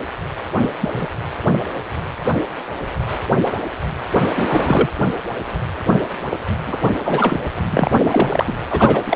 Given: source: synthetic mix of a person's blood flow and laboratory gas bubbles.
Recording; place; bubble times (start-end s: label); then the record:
Doppler ultrasound of blood flow; precordium
0.62-0.71 s: bubbles
0.80-1.08 s: bubbles
4.35-4.88 s: bubbles
6.67-6.77 s: bubbles
7.03-7.38 s: bubbles
7.70-7.91 s: bubbles
8.11-8.53 s: bubbles
8.71-9.03 s: bubbles
9.05-9.16 s: bubbles
From the record:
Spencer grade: 2 (many but less than half of the cardiac periods contain bubble signals, singularly or in groups); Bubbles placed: anywhere in the cardiac cycle